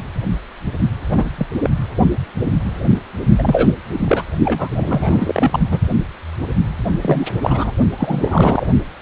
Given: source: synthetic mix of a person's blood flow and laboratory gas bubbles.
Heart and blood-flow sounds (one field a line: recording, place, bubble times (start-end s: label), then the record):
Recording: Doppler ultrasound of blood flow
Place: precordium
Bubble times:
1.09-1.30 s: bubbles
1.38-1.47 s: bubbles
1.63-1.70 s: bubbles
3.38-3.72 s: bubbles
3.93-3.99 s: bubbles
4.05-4.23 s: bubbles
4.45-5.60 s: bubbles
5.71-5.79 s: bubbles
7.01-7.27 s: bubbles
7.41-7.72 s: bubbles
7.97-8.67 s: bubbles
From the record:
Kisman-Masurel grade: 223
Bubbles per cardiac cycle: several, 3 to 8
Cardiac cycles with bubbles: 10 to 50%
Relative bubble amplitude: loud (0.450 to 0.775)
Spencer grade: 2 (many but less than half of the cardiac periods contain bubble signals, singularly or in groups)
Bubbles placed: only in the low amplitude regions of the cardiac cycle